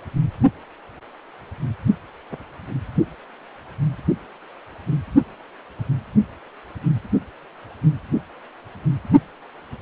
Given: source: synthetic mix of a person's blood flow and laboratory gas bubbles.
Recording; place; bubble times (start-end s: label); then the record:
Doppler ultrasound of blood flow; precordium
2.31-2.37 s: bubbles
From the record:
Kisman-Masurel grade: 111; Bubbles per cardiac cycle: 1 to 2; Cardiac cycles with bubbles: 1 to 10%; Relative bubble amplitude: barely perceptible (0.100 to 0.250); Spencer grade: 1 (occasional bubble signal discernible with the cardiac motion signal, with majority of cardiac periods free of bubbles); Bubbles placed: anywhere in the cardiac cycle